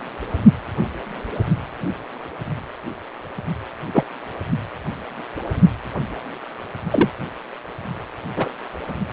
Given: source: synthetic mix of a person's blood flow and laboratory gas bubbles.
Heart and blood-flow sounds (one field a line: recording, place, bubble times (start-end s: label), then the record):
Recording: Doppler ultrasound of blood flow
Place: precordium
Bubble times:
3.94-4.03 s: bubbles
6.90-7.10 s: bubbles
8.36-8.51 s: bubbles
From the record:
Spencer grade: 2 (many but less than half of the cardiac periods contain bubble signals, singularly or in groups)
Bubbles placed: only in the low amplitude regions of the cardiac cycle